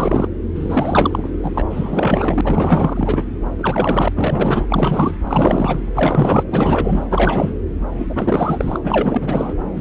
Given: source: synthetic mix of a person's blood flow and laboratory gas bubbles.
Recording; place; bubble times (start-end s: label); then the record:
Doppler ultrasound of blood flow; subclavian vein
0.00-0.28 s: bubbles
0.55-1.31 s: bubbles
1.42-1.63 s: bubbles
1.69-2.41 s: bubbles
2.44-3.25 s: bubbles
3.58-4.08 s: bubbles
4.15-4.66 s: bubbles
4.69-5.17 s: bubbles
5.27-5.82 s: bubbles
5.94-6.44 s: bubbles
6.51-7.04 s: bubbles
7.10-7.54 s: bubbles
7.98-8.06 s: bubbles
8.09-8.79 s: bubbles
8.83-9.53 s: bubbles
9.75-9.81 s: bubbles
From the record:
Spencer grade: 4 (maximum detectable bubble signal sounding continuously throughout systole and diastole of every cardiac period, and overriding the amplitude of the normal cardiac signals); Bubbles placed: anywhere in the cardiac cycle